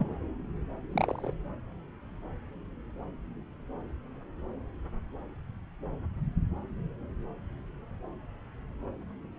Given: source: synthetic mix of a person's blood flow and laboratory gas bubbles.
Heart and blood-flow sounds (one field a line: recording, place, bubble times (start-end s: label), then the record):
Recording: Doppler ultrasound of blood flow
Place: subclavian vein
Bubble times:
0.00-0.05 s: bubbles
0.92-1.33 s: bubbles
From the record:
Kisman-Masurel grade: 111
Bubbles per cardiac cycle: 1 to 2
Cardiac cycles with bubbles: 1 to 10%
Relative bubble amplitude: barely perceptible (0.100 to 0.250)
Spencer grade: 1 (occasional bubble signal discernible with the cardiac motion signal, with majority of cardiac periods free of bubbles)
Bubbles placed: anywhere in the cardiac cycle